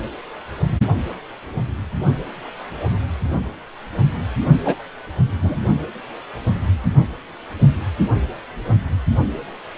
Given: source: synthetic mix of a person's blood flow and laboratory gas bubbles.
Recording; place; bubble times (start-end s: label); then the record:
Doppler ultrasound of blood flow; precordium
4.64-4.75 s: bubbles
5.42-5.58 s: bubbles
From the record:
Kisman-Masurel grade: 223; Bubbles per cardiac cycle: several, 3 to 8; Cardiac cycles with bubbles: 10 to 50%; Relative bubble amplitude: loud (0.450 to 0.775); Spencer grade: 2 (many but less than half of the cardiac periods contain bubble signals, singularly or in groups); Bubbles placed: only in the low amplitude regions of the cardiac cycle